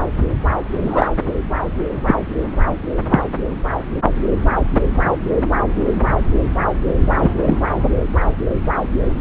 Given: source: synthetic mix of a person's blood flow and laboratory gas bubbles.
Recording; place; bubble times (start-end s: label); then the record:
Doppler ultrasound of blood flow; subclavian vein
0.73-1.12 s: bubbles
2.07-2.15 s: bubbles
3.10-3.24 s: bubbles
7.21-7.34 s: bubbles
7.42-7.59 s: bubbles
From the record:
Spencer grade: 2 (many but less than half of the cardiac periods contain bubble signals, singularly or in groups); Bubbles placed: anywhere in the cardiac cycle